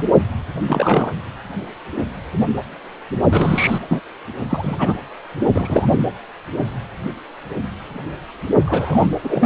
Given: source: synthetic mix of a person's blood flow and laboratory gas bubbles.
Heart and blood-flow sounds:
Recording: Doppler ultrasound of blood flow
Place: precordium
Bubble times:
0.00-0.03 s: bubbles
0.67-1.12 s: bubbles
3.31-3.78 s: bubbles
3.91-4.00 s: bubbles
4.48-4.98 s: bubbles
5.54-6.04 s: bubbles
8.65-9.07 s: bubbles
9.23-9.46 s: bubbles
From the record:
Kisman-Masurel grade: 223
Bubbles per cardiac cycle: several, 3 to 8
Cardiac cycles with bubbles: 10 to 50%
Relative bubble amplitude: loud (0.450 to 0.775)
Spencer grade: 2 (many but less than half of the cardiac periods contain bubble signals, singularly or in groups)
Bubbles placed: anywhere in the cardiac cycle

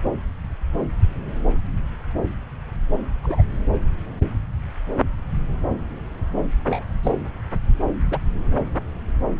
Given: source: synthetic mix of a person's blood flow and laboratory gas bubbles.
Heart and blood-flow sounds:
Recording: Doppler ultrasound of blood flow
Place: subclavian vein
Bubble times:
3.23-3.43 s: bubbles
6.65-6.84 s: bubbles
7.03-7.11 s: bubbles
8.11-8.18 s: bubbles
From the record:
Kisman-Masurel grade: 121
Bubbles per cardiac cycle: 1 to 2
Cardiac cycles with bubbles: 10 to 50%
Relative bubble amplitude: barely perceptible (0.100 to 0.250)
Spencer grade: 2 (many but less than half of the cardiac periods contain bubble signals, singularly or in groups)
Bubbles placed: anywhere in the cardiac cycle

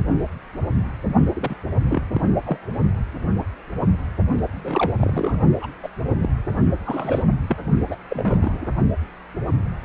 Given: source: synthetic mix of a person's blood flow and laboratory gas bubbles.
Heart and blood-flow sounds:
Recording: Doppler ultrasound of blood flow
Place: precordium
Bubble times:
1.36-1.56 s: bubbles
1.90-2.03 s: bubbles
2.14-2.21 s: bubbles
2.44-2.58 s: bubbles
4.52-4.93 s: bubbles
4.96-5.38 s: bubbles
5.61-5.67 s: bubbles
5.83-5.89 s: bubbles
6.22-6.29 s: bubbles
6.85-7.35 s: bubbles
7.49-7.57 s: bubbles
7.88-7.96 s: bubbles
8.09-8.67 s: bubbles
From the record:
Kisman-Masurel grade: 222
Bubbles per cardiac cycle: several, 3 to 8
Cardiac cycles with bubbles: 10 to 50%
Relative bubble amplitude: moderate (0.250 to 0.450)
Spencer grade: 2 (many but less than half of the cardiac periods contain bubble signals, singularly or in groups)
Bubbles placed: only in the low amplitude regions of the cardiac cycle

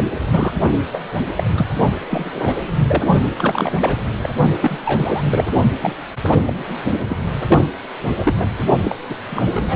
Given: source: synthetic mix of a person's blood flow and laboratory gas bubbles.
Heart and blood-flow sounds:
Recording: Doppler ultrasound of blood flow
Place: precordium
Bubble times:
0.00-0.06 s: bubbles
0.30-0.52 s: bubbles
0.93-1.01 s: bubbles
1.35-1.44 s: bubbles
1.56-1.67 s: bubbles
2.10-2.62 s: bubbles
2.87-3.04 s: bubbles
3.33-3.72 s: bubbles
3.80-4.01 s: bubbles
4.22-4.29 s: bubbles
4.60-4.77 s: bubbles
4.85-5.25 s: bubbles
5.29-5.50 s: bubbles
5.80-5.96 s: bubbles
6.27-6.54 s: bubbles
7.09-7.17 s: bubbles
7.48-7.64 s: bubbles
8.16-8.34 s: bubbles
8.38-8.47 s: bubbles
8.84-8.96 s: bubbles
9.10-9.14 s: bubbles
9.19-9.43 s: bubbles
9.54-9.76 s: bubbles
From the record:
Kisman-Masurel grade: 242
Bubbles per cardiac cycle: several, 3 to 8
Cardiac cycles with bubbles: 100%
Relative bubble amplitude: moderate (0.250 to 0.450)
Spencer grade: 3 (all of the cardiac periods contain showers or single bubble signals, but not dominating or overriding the cardiac motion signals)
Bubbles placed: only in the low amplitude regions of the cardiac cycle

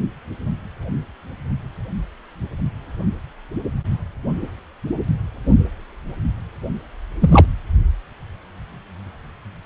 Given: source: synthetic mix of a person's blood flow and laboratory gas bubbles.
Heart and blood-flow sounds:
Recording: Doppler ultrasound of blood flow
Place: precordium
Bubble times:
7.21-7.46 s: bubbles
From the record:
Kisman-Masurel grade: 213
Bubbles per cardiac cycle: several, 3 to 8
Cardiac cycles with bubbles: 1 to 10%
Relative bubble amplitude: loud (0.450 to 0.775)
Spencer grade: 1 (occasional bubble signal discernible with the cardiac motion signal, with majority of cardiac periods free of bubbles)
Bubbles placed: anywhere in the cardiac cycle

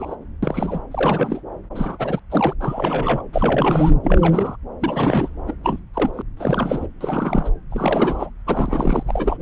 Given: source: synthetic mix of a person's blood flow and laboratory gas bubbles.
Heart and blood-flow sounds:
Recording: Doppler ultrasound of blood flow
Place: subclavian vein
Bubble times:
0.00-0.15 s: bubbles
0.43-0.81 s: bubbles
0.91-1.41 s: bubbles
1.75-2.19 s: bubbles
2.30-2.53 s: bubbles
2.60-3.22 s: bubbles
3.32-3.91 s: bubbles
4.04-4.56 s: bubbles
4.81-5.29 s: bubbles
5.46-5.53 s: bubbles
5.63-5.79 s: bubbles
5.94-6.22 s: bubbles
6.37-6.87 s: bubbles
7.00-7.50 s: bubbles
7.70-8.29 s: bubbles
8.46-9.03 s: bubbles
9.07-9.37 s: bubbles
9.39-9.42 s: bubbles
From the record:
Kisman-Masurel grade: 342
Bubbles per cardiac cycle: rolling drumbeat, 9 or more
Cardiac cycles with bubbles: 100%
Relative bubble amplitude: moderate (0.250 to 0.450)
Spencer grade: 3 (all of the cardiac periods contain showers or single bubble signals, but not dominating or overriding the cardiac motion signals)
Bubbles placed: anywhere in the cardiac cycle

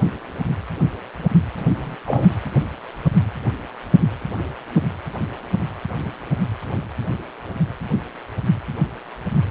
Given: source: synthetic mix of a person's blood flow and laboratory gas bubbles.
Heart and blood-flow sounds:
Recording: Doppler ultrasound of blood flow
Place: precordium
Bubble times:
1.69-1.96 s: bubbles
2.07-2.28 s: bubbles
From the record:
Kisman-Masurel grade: 112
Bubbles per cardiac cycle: 1 to 2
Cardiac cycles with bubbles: 1 to 10%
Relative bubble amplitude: moderate (0.250 to 0.450)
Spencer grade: 1 (occasional bubble signal discernible with the cardiac motion signal, with majority of cardiac periods free of bubbles)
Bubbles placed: anywhere in the cardiac cycle

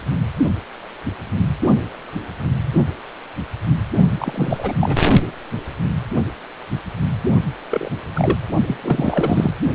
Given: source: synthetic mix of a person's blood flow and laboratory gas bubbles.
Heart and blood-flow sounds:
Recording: Doppler ultrasound of blood flow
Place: precordium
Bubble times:
4.18-4.75 s: bubbles
4.80-4.97 s: bubbles
7.70-7.89 s: bubbles
8.13-8.38 s: bubbles
8.67-8.77 s: bubbles
8.82-9.53 s: bubbles
From the record:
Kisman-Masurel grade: 222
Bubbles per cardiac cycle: several, 3 to 8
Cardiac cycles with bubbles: 10 to 50%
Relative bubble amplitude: moderate (0.250 to 0.450)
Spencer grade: 2 (many but less than half of the cardiac periods contain bubble signals, singularly or in groups)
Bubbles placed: only in the low amplitude regions of the cardiac cycle

